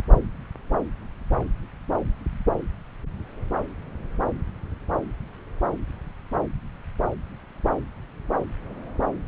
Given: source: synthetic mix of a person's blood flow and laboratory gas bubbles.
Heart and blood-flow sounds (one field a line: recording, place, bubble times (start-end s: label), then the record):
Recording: Doppler ultrasound of blood flow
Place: subclavian vein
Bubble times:
no bubbles
From the record:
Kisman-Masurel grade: 000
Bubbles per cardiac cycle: 0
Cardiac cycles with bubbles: 0%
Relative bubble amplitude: no bubbles discernible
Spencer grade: 0 (complete lack of bubble signals)